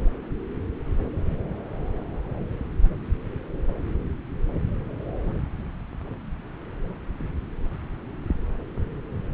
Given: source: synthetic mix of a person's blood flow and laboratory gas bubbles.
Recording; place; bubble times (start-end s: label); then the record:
Doppler ultrasound of blood flow; subclavian vein
no bubbles
From the record:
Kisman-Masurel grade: 000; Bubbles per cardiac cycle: 0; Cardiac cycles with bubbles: 0%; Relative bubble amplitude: no bubbles discernible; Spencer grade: 0 (complete lack of bubble signals)